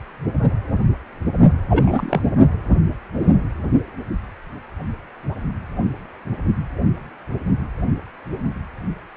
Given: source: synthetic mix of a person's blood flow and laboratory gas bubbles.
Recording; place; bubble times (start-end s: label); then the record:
Doppler ultrasound of blood flow; precordium
1.70-2.22 s: bubbles
From the record:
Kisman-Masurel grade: 222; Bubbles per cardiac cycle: several, 3 to 8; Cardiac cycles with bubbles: 10 to 50%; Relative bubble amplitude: moderate (0.250 to 0.450); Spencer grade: 2 (many but less than half of the cardiac periods contain bubble signals, singularly or in groups); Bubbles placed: only in the low amplitude regions of the cardiac cycle